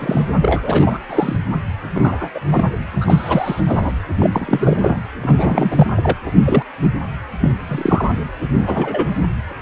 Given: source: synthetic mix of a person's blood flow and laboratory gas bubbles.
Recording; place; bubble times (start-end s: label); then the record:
Doppler ultrasound of blood flow; precordium
0.00-0.26 s: bubbles
0.42-0.99 s: bubbles
1.09-1.36 s: bubbles
1.94-2.30 s: bubbles
2.34-2.40 s: bubbles
2.51-2.64 s: bubbles
3.00-3.62 s: bubbles
3.66-3.92 s: bubbles
4.19-5.00 s: bubbles
5.22-6.12 s: bubbles
6.25-6.31 s: bubbles
6.45-6.62 s: bubbles
6.82-6.88 s: bubbles
7.40-7.52 s: bubbles
7.67-8.10 s: bubbles
8.58-9.08 s: bubbles
From the record:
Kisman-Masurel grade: 243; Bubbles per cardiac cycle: several, 3 to 8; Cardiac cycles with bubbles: 100%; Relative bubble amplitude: loud (0.450 to 0.775); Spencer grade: 3 (all of the cardiac periods contain showers or single bubble signals, but not dominating or overriding the cardiac motion signals); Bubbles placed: anywhere in the cardiac cycle